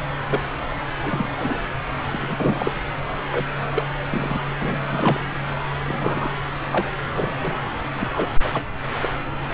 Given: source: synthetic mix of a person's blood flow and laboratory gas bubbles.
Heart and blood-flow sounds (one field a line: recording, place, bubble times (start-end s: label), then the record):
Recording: Doppler ultrasound of blood flow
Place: subclavian vein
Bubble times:
0.27-0.40 s: bubbles
1.02-1.27 s: bubbles
1.40-1.58 s: bubbles
2.12-2.71 s: bubbles
3.32-3.42 s: bubbles
3.74-3.83 s: bubbles
4.11-4.39 s: bubbles
4.58-4.82 s: bubbles
4.92-5.29 s: bubbles
5.86-6.30 s: bubbles
6.71-6.99 s: bubbles
7.14-7.57 s: bubbles
7.96-8.08 s: bubbles
8.16-8.28 s: bubbles
8.43-8.49 s: bubbles
8.53-8.63 s: bubbles
9.03-9.09 s: bubbles
9.52-9.54 s: bubbles
From the record:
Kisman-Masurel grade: 242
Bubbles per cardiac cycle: several, 3 to 8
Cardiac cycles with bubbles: 100%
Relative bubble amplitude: moderate (0.250 to 0.450)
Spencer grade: 3 (all of the cardiac periods contain showers or single bubble signals, but not dominating or overriding the cardiac motion signals)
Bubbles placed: anywhere in the cardiac cycle